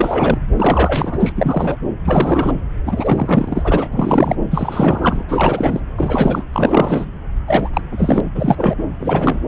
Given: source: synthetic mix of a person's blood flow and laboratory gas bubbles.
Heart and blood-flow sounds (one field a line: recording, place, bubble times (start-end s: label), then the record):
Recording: Doppler ultrasound of blood flow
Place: subclavian vein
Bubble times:
0.00-0.39 s: bubbles
0.57-1.32 s: bubbles
1.35-1.76 s: bubbles
2.05-2.55 s: bubbles
2.85-3.89 s: bubbles
3.93-4.35 s: bubbles
4.50-5.23 s: bubbles
5.29-5.80 s: bubbles
5.97-6.43 s: bubbles
6.53-7.05 s: bubbles
7.47-7.69 s: bubbles
7.73-7.81 s: bubbles
7.92-8.21 s: bubbles
8.35-8.75 s: bubbles
9.00-9.42 s: bubbles
From the record:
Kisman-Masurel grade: 343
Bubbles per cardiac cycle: rolling drumbeat, 9 or more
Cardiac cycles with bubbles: 100%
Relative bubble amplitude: loud (0.450 to 0.775)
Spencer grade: 3 (all of the cardiac periods contain showers or single bubble signals, but not dominating or overriding the cardiac motion signals)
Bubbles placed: anywhere in the cardiac cycle